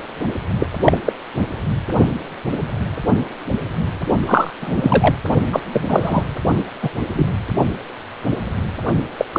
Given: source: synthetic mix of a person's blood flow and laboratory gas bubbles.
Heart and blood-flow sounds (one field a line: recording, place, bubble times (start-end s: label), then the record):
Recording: Doppler ultrasound of blood flow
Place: precordium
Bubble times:
0.59-0.67 s: bubbles
0.84-0.98 s: bubbles
1.05-1.12 s: bubbles
4.26-4.50 s: bubbles
4.61-5.15 s: bubbles
5.52-5.60 s: bubbles
5.72-5.85 s: bubbles
5.88-6.23 s: bubbles
6.58-6.63 s: bubbles
6.81-6.89 s: bubbles
7.15-7.26 s: bubbles
9.17-9.25 s: bubbles
9.33-9.39 s: bubbles
From the record:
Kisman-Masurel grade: 233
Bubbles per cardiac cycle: several, 3 to 8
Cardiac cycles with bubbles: 50 to 99%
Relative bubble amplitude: loud (0.450 to 0.775)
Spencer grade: 3 (all of the cardiac periods contain showers or single bubble signals, but not dominating or overriding the cardiac motion signals)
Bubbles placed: only in the low amplitude regions of the cardiac cycle